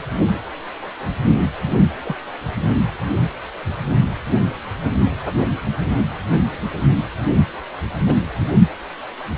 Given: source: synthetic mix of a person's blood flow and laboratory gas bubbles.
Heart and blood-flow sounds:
Doppler ultrasound of blood flow; precordium
2.03-2.15 s: bubbles
8.05-8.17 s: bubbles
From the record:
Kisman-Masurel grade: 121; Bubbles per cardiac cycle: 1 to 2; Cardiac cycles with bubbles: 10 to 50%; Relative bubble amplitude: barely perceptible (0.100 to 0.250); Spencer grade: 2 (many but less than half of the cardiac periods contain bubble signals, singularly or in groups); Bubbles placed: only in the low amplitude regions of the cardiac cycle

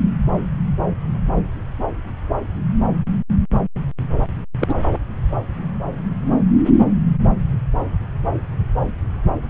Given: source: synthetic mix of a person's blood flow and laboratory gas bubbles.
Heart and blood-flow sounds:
Doppler ultrasound of blood flow; subclavian vein
4.59-4.74 s: bubbles
From the record:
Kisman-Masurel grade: 112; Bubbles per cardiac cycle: 1 to 2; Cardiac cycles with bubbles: 1 to 10%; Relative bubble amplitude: moderate (0.250 to 0.450); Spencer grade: 1 (occasional bubble signal discernible with the cardiac motion signal, with majority of cardiac periods free of bubbles); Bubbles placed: anywhere in the cardiac cycle

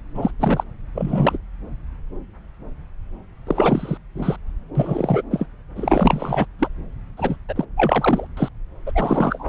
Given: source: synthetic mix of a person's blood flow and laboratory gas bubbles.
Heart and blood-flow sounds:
Doppler ultrasound of blood flow; subclavian vein
0.14-0.31 s: bubbles
0.40-0.64 s: bubbles
0.95-1.38 s: bubbles
3.47-3.97 s: bubbles
4.15-4.36 s: bubbles
4.75-5.21 s: bubbles
5.30-5.46 s: bubbles
5.75-6.46 s: bubbles
6.59-6.68 s: bubbles
7.17-7.36 s: bubbles
7.48-7.65 s: bubbles
7.77-8.27 s: bubbles
8.37-8.49 s: bubbles
8.86-8.92 s: bubbles
8.95-9.49 s: bubbles
From the record:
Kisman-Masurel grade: 332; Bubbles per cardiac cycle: rolling drumbeat, 9 or more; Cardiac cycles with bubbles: 50 to 99%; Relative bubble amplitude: moderate (0.250 to 0.450); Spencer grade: 3 (all of the cardiac periods contain showers or single bubble signals, but not dominating or overriding the cardiac motion signals); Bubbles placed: anywhere in the cardiac cycle

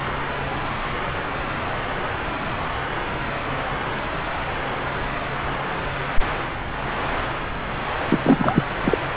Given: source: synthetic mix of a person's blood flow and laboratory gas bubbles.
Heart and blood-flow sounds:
Doppler ultrasound of blood flow; subclavian vein
8.08-8.18 s: bubbles
8.23-8.62 s: bubbles
8.83-8.98 s: bubbles
From the record:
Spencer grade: 1 (occasional bubble signal discernible with the cardiac motion signal, with majority of cardiac periods free of bubbles); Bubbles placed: anywhere in the cardiac cycle

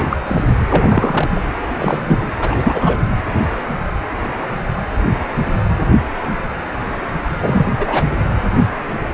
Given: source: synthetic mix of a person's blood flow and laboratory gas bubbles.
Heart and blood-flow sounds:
Doppler ultrasound of blood flow; precordium
0.00-0.05 s: bubbles
0.10-0.18 s: bubbles
0.26-0.44 s: bubbles
0.69-1.40 s: bubbles
1.79-2.27 s: bubbles
2.42-3.01 s: bubbles
7.40-7.67 s: bubbles
7.78-8.06 s: bubbles
From the record:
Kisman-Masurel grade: 233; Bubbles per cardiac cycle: several, 3 to 8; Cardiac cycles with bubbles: 50 to 99%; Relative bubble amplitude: loud (0.450 to 0.775); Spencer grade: 3 (all of the cardiac periods contain showers or single bubble signals, but not dominating or overriding the cardiac motion signals); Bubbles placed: anywhere in the cardiac cycle

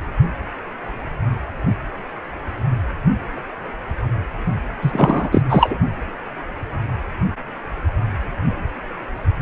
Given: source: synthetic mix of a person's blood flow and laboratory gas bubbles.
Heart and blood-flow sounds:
Doppler ultrasound of blood flow; precordium
4.81-5.42 s: bubbles
5.50-5.78 s: bubbles
From the record:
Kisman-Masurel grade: 213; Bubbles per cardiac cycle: several, 3 to 8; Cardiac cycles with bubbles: 1 to 10%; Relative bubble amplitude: loud (0.450 to 0.775); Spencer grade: 1 (occasional bubble signal discernible with the cardiac motion signal, with majority of cardiac periods free of bubbles); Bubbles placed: only in the low amplitude regions of the cardiac cycle

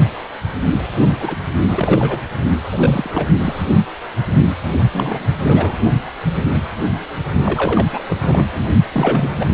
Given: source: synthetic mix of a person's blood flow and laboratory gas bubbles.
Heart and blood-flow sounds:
Doppler ultrasound of blood flow; precordium
1.20-1.36 s: bubbles
1.59-2.22 s: bubbles
2.73-3.27 s: bubbles
3.44-3.62 s: bubbles
4.92-5.29 s: bubbles
5.40-5.78 s: bubbles
7.44-7.86 s: bubbles
7.92-8.44 s: bubbles
8.52-8.64 s: bubbles
8.92-9.46 s: bubbles
From the record:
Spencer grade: 3 (all of the cardiac periods contain showers or single bubble signals, but not dominating or overriding the cardiac motion signals); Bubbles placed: only in the low amplitude regions of the cardiac cycle

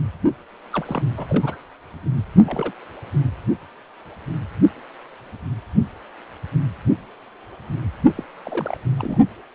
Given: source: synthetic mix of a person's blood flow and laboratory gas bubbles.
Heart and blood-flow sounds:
Doppler ultrasound of blood flow; precordium
0.73-1.08 s: bubbles
1.17-1.58 s: bubbles
2.44-2.71 s: bubbles
8.15-8.24 s: bubbles
8.43-8.80 s: bubbles
8.98-9.18 s: bubbles
From the record:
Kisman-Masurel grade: 221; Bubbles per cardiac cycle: several, 3 to 8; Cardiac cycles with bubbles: 10 to 50%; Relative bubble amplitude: barely perceptible (0.100 to 0.250); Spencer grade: 2 (many but less than half of the cardiac periods contain bubble signals, singularly or in groups); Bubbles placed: only in the low amplitude regions of the cardiac cycle

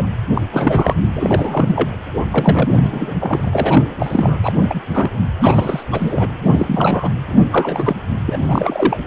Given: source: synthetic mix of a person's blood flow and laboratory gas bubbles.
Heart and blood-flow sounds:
Doppler ultrasound of blood flow; precordium
0.00-0.06 s: bubbles
0.33-0.42 s: bubbles
0.51-0.94 s: bubbles
1.15-1.90 s: bubbles
2.31-3.15 s: bubbles
3.20-3.50 s: bubbles
3.52-3.85 s: bubbles
3.99-4.38 s: bubbles
4.43-4.52 s: bubbles
4.60-4.81 s: bubbles
4.93-5.10 s: bubbles
5.38-5.83 s: bubbles
5.92-6.31 s: bubbles
6.45-7.09 s: bubbles
7.27-7.42 s: bubbles
7.51-7.96 s: bubbles
8.27-8.39 s: bubbles
8.43-8.97 s: bubbles
From the record:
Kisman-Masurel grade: 343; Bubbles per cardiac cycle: rolling drumbeat, 9 or more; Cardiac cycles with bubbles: 100%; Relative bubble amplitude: loud (0.450 to 0.775); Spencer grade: 3 (all of the cardiac periods contain showers or single bubble signals, but not dominating or overriding the cardiac motion signals); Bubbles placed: anywhere in the cardiac cycle

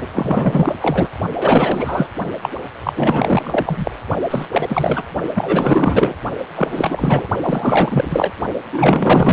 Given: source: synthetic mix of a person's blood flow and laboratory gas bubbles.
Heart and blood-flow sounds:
Doppler ultrasound of blood flow; precordium
0.00-0.06 s: bubbles
0.14-0.76 s: bubbles
0.82-1.10 s: bubbles
1.38-2.08 s: bubbles
2.43-2.50 s: bubbles
2.83-2.93 s: bubbles
2.96-3.91 s: bubbles
4.30-4.46 s: bubbles
4.50-5.03 s: bubbles
5.34-6.16 s: bubbles
6.55-6.68 s: bubbles
6.71-7.28 s: bubbles
7.42-8.32 s: bubbles
8.72-9.33 s: bubbles
From the record:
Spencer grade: 4 (maximum detectable bubble signal sounding continuously throughout systole and diastole of every cardiac period, and overriding the amplitude of the normal cardiac signals); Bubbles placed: only in the low amplitude regions of the cardiac cycle

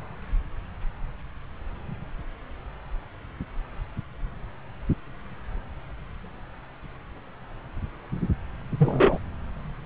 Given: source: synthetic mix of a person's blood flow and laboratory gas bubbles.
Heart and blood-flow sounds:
Doppler ultrasound of blood flow; subclavian vein
8.78-9.19 s: bubbles
From the record:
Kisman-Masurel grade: 113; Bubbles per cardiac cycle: 1 to 2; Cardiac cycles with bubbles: 1 to 10%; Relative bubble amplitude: loud (0.450 to 0.775); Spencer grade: 1 (occasional bubble signal discernible with the cardiac motion signal, with majority of cardiac periods free of bubbles); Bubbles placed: anywhere in the cardiac cycle

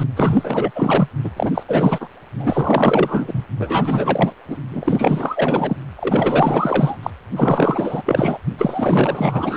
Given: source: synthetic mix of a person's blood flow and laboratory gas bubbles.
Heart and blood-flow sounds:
Doppler ultrasound of blood flow; precordium
0.00-0.04 s: bubbles
0.16-0.71 s: bubbles
0.75-1.08 s: bubbles
1.24-1.31 s: bubbles
1.36-1.51 s: bubbles
1.54-1.63 s: bubbles
1.68-2.10 s: bubbles
2.35-3.46 s: bubbles
3.58-4.33 s: bubbles
4.47-4.57 s: bubbles
4.71-5.76 s: bubbles
5.96-6.97 s: bubbles
7.03-7.11 s: bubbles
7.36-8.02 s: bubbles
8.05-8.38 s: bubbles
8.57-9.56 s: bubbles
From the record:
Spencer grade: 4 (maximum detectable bubble signal sounding continuously throughout systole and diastole of every cardiac period, and overriding the amplitude of the normal cardiac signals); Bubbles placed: anywhere in the cardiac cycle

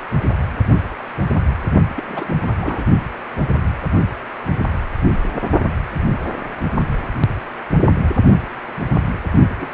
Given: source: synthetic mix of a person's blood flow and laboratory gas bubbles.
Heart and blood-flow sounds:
Doppler ultrasound of blood flow; precordium
1.97-2.40 s: bubbles
2.46-2.88 s: bubbles
9.57-9.68 s: bubbles
From the record:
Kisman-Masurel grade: 221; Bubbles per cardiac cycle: several, 3 to 8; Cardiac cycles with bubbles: 10 to 50%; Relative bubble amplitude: barely perceptible (0.100 to 0.250); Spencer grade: 2 (many but less than half of the cardiac periods contain bubble signals, singularly or in groups); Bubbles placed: only in the low amplitude regions of the cardiac cycle

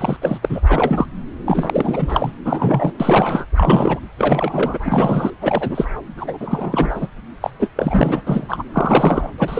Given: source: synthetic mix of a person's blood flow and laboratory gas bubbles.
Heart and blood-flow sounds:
Doppler ultrasound of blood flow; subclavian vein
0.00-0.17 s: bubbles
0.21-0.39 s: bubbles
0.41-0.61 s: bubbles
0.67-1.06 s: bubbles
1.45-2.32 s: bubbles
2.45-2.93 s: bubbles
2.99-3.46 s: bubbles
3.55-4.00 s: bubbles
4.17-4.79 s: bubbles
4.81-5.31 s: bubbles
5.42-5.87 s: bubbles
6.17-6.38 s: bubbles
6.40-7.08 s: bubbles
7.42-7.50 s: bubbles
7.59-7.70 s: bubbles
7.76-8.22 s: bubbles
8.27-8.64 s: bubbles
8.73-9.28 s: bubbles
9.38-9.60 s: bubbles
From the record:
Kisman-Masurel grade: 333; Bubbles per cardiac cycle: rolling drumbeat, 9 or more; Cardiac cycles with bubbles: 50 to 99%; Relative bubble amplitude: loud (0.450 to 0.775); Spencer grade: 3 (all of the cardiac periods contain showers or single bubble signals, but not dominating or overriding the cardiac motion signals); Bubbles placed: anywhere in the cardiac cycle

